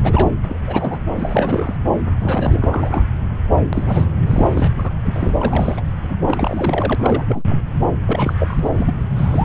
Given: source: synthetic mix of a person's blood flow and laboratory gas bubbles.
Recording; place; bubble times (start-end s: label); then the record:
Doppler ultrasound of blood flow; subclavian vein
0.03-0.28 s: bubbles
0.43-0.57 s: bubbles
0.67-0.99 s: bubbles
1.18-1.77 s: bubbles
2.20-3.04 s: bubbles
3.57-3.65 s: bubbles
3.73-4.09 s: bubbles
4.27-4.72 s: bubbles
4.78-4.90 s: bubbles
5.05-5.81 s: bubbles
6.09-6.16 s: bubbles
6.27-6.95 s: bubbles
6.98-7.43 s: bubbles
7.47-7.62 s: bubbles
8.07-8.34 s: bubbles
8.38-8.71 s: bubbles
8.74-8.92 s: bubbles
9.15-9.45 s: bubbles
From the record:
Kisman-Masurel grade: 332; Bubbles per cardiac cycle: rolling drumbeat, 9 or more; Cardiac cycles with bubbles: 50 to 99%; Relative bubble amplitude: moderate (0.250 to 0.450); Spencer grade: 3 (all of the cardiac periods contain showers or single bubble signals, but not dominating or overriding the cardiac motion signals); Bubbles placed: anywhere in the cardiac cycle